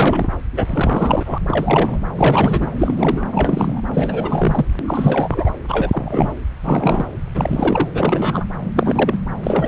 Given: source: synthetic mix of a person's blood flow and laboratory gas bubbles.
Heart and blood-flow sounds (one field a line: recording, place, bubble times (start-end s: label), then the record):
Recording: Doppler ultrasound of blood flow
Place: subclavian vein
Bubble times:
0.00-0.28 s: bubbles
0.56-1.38 s: bubbles
1.47-2.00 s: bubbles
2.15-2.70 s: bubbles
2.79-3.25 s: bubbles
3.32-3.81 s: bubbles
3.94-4.66 s: bubbles
4.87-5.50 s: bubbles
5.69-6.32 s: bubbles
6.64-7.07 s: bubbles
7.34-7.89 s: bubbles
7.93-8.45 s: bubbles
8.75-9.17 s: bubbles
9.43-9.68 s: bubbles
From the record:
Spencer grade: 3 (all of the cardiac periods contain showers or single bubble signals, but not dominating or overriding the cardiac motion signals)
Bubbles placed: anywhere in the cardiac cycle